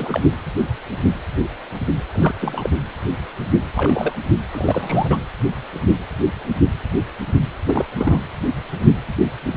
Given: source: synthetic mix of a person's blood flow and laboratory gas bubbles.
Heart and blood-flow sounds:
Doppler ultrasound of blood flow; precordium
0.00-0.21 s: bubbles
0.24-0.34 s: bubbles
2.13-2.34 s: bubbles
2.40-2.70 s: bubbles
3.75-4.15 s: bubbles
4.51-5.17 s: bubbles
7.67-7.85 s: bubbles
7.94-8.20 s: bubbles
From the record:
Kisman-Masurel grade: 222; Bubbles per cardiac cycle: several, 3 to 8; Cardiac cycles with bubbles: 10 to 50%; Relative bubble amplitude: moderate (0.250 to 0.450); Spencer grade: 2 (many but less than half of the cardiac periods contain bubble signals, singularly or in groups); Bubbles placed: anywhere in the cardiac cycle

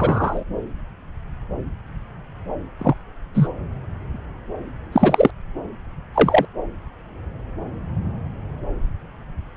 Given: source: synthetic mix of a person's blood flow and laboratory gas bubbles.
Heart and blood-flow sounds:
Doppler ultrasound of blood flow; subclavian vein
0.00-0.43 s: bubbles
2.79-2.94 s: bubbles
3.34-3.49 s: bubbles
4.92-5.30 s: bubbles
6.14-6.45 s: bubbles
From the record:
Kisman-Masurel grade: 123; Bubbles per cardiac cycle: 1 to 2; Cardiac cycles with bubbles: 10 to 50%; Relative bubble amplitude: loud (0.450 to 0.775); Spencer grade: 2 (many but less than half of the cardiac periods contain bubble signals, singularly or in groups); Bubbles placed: anywhere in the cardiac cycle

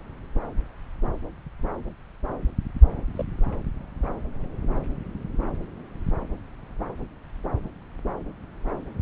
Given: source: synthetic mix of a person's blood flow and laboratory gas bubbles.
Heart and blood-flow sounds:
Doppler ultrasound of blood flow; subclavian vein
3.16-3.25 s: bubbles
From the record:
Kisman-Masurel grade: 121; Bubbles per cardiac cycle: 1 to 2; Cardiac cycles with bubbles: 10 to 50%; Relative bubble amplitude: barely perceptible (0.100 to 0.250); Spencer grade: 2 (many but less than half of the cardiac periods contain bubble signals, singularly or in groups); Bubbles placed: anywhere in the cardiac cycle

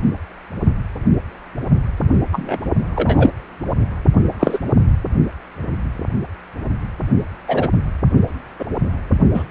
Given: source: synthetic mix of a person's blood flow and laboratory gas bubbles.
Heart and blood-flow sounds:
Doppler ultrasound of blood flow; precordium
2.32-2.59 s: bubbles
2.95-3.30 s: bubbles
4.39-4.58 s: bubbles
7.47-7.69 s: bubbles
8.59-8.65 s: bubbles
9.34-9.44 s: bubbles
From the record:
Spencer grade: 2 (many but less than half of the cardiac periods contain bubble signals, singularly or in groups); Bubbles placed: only in the low amplitude regions of the cardiac cycle

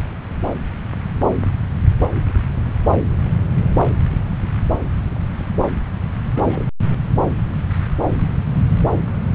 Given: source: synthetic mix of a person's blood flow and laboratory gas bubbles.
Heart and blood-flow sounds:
Doppler ultrasound of blood flow; subclavian vein
6.36-6.67 s: bubbles
From the record:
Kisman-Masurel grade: 121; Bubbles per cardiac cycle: 1 to 2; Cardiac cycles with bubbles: 10 to 50%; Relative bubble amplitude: barely perceptible (0.100 to 0.250); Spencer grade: 2 (many but less than half of the cardiac periods contain bubble signals, singularly or in groups); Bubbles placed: anywhere in the cardiac cycle

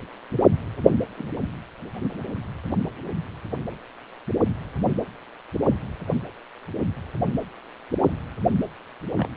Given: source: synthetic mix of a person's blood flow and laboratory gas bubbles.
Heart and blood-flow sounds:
Doppler ultrasound of blood flow; precordium
1.17-1.27 s: bubbles
9.17-9.28 s: bubbles
From the record:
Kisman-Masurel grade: 121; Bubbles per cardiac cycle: 1 to 2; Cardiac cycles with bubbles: 10 to 50%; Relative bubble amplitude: barely perceptible (0.100 to 0.250); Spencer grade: 2 (many but less than half of the cardiac periods contain bubble signals, singularly or in groups); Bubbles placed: anywhere in the cardiac cycle

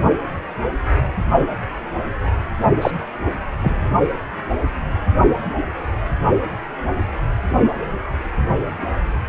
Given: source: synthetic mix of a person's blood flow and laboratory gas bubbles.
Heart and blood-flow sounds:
Doppler ultrasound of blood flow; precordium
2.81-2.91 s: bubbles
3.60-3.90 s: bubbles
From the record:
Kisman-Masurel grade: 112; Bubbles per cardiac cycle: 1 to 2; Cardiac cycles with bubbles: 1 to 10%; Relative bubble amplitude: moderate (0.250 to 0.450); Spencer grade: 1 (occasional bubble signal discernible with the cardiac motion signal, with majority of cardiac periods free of bubbles); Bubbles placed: only in the low amplitude regions of the cardiac cycle

